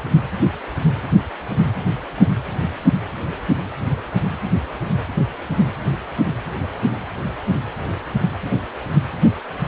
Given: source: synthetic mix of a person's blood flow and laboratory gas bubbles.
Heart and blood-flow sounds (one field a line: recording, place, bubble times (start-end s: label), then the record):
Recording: Doppler ultrasound of blood flow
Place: precordium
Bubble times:
no bubbles
From the record:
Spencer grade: 0 (complete lack of bubble signals)